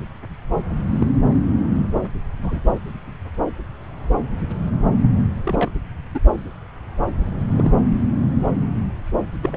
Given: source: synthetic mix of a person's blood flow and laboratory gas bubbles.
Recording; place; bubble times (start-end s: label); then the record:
Doppler ultrasound of blood flow; subclavian vein
0.98-1.07 s: bubbles
2.42-2.60 s: bubbles
5.43-5.71 s: bubbles
6.14-6.20 s: bubbles
7.51-7.72 s: bubbles
9.42-9.57 s: bubbles
From the record:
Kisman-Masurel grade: 122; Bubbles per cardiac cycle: 1 to 2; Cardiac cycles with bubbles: 10 to 50%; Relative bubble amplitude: moderate (0.250 to 0.450); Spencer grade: 2 (many but less than half of the cardiac periods contain bubble signals, singularly or in groups); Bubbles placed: anywhere in the cardiac cycle